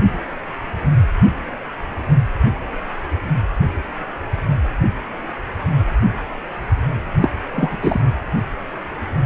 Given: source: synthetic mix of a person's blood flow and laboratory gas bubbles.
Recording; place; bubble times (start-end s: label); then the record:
Doppler ultrasound of blood flow; precordium
7.20-7.30 s: bubbles
7.52-7.79 s: bubbles
7.83-8.00 s: bubbles
From the record:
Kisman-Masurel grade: 213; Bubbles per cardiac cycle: several, 3 to 8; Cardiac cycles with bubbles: 1 to 10%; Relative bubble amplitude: loud (0.450 to 0.775); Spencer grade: 1 (occasional bubble signal discernible with the cardiac motion signal, with majority of cardiac periods free of bubbles); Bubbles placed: anywhere in the cardiac cycle